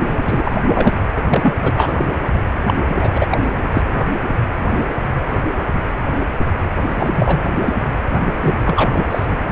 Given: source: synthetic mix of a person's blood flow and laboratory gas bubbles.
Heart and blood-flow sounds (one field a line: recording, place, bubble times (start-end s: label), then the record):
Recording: Doppler ultrasound of blood flow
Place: precordium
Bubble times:
0.00-0.16 s: bubbles
0.21-0.52 s: bubbles
0.74-0.90 s: bubbles
1.17-1.23 s: bubbles
1.29-1.54 s: bubbles
1.62-1.94 s: bubbles
1.98-2.05 s: bubbles
2.67-2.83 s: bubbles
2.88-3.38 s: bubbles
3.74-3.82 s: bubbles
3.94-4.04 s: bubbles
6.95-7.73 s: bubbles
8.40-8.90 s: bubbles
8.93-9.04 s: bubbles
9.10-9.25 s: bubbles
9.30-9.43 s: bubbles
From the record:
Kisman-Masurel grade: 333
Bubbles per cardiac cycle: rolling drumbeat, 9 or more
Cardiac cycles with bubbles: 50 to 99%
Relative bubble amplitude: loud (0.450 to 0.775)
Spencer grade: 3 (all of the cardiac periods contain showers or single bubble signals, but not dominating or overriding the cardiac motion signals)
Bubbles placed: anywhere in the cardiac cycle